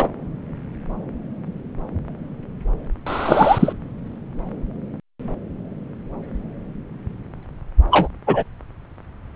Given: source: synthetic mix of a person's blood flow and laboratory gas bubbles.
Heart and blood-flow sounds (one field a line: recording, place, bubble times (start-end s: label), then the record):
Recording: Doppler ultrasound of blood flow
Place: subclavian vein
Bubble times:
0.00-0.09 s: bubbles
3.06-3.73 s: bubbles
7.91-8.08 s: bubbles
8.27-8.43 s: bubbles
From the record:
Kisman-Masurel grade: 123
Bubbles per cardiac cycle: 1 to 2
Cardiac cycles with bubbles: 10 to 50%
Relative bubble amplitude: loud (0.450 to 0.775)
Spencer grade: 2 (many but less than half of the cardiac periods contain bubble signals, singularly or in groups)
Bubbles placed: anywhere in the cardiac cycle